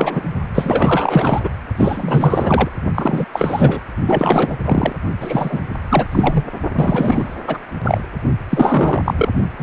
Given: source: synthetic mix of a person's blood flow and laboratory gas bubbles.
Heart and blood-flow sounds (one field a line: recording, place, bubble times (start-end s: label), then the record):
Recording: Doppler ultrasound of blood flow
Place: precordium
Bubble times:
0.00-0.23 s: bubbles
0.55-1.50 s: bubbles
1.77-2.69 s: bubbles
2.95-3.27 s: bubbles
3.33-3.80 s: bubbles
4.06-4.56 s: bubbles
4.65-4.92 s: bubbles
5.20-5.60 s: bubbles
5.89-6.08 s: bubbles
6.12-6.45 s: bubbles
6.75-7.34 s: bubbles
7.47-7.58 s: bubbles
7.83-8.01 s: bubbles
8.50-9.29 s: bubbles
9.57-9.63 s: bubbles
From the record:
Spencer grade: 4 (maximum detectable bubble signal sounding continuously throughout systole and diastole of every cardiac period, and overriding the amplitude of the normal cardiac signals)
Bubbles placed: only in the low amplitude regions of the cardiac cycle